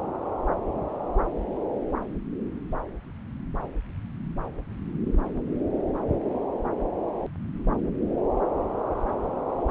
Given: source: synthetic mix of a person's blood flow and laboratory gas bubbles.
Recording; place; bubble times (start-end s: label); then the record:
Doppler ultrasound of blood flow; subclavian vein
no bubbles
From the record:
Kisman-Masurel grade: 000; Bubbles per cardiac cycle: 0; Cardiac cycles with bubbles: 0%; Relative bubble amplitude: no bubbles discernible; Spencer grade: 0 (complete lack of bubble signals)